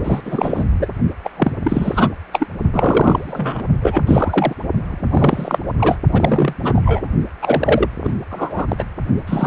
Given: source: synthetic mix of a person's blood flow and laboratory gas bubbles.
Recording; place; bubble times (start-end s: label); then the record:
Doppler ultrasound of blood flow; precordium
0.04-0.21 s: bubbles
0.25-0.64 s: bubbles
0.79-0.88 s: bubbles
1.24-1.31 s: bubbles
1.36-1.56 s: bubbles
1.63-2.11 s: bubbles
2.32-2.47 s: bubbles
2.73-3.66 s: bubbles
3.81-4.04 s: bubbles
4.07-4.56 s: bubbles
4.89-5.59 s: bubbles
5.79-5.98 s: bubbles
6.08-6.54 s: bubbles
6.62-7.08 s: bubbles
7.42-7.88 s: bubbles
8.03-8.13 s: bubbles
8.31-8.84 s: bubbles
9.27-9.47 s: bubbles
From the record:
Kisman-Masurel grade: 343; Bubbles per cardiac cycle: rolling drumbeat, 9 or more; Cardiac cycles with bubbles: 100%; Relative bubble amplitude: loud (0.450 to 0.775); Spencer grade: 3 (all of the cardiac periods contain showers or single bubble signals, but not dominating or overriding the cardiac motion signals); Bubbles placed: only in the low amplitude regions of the cardiac cycle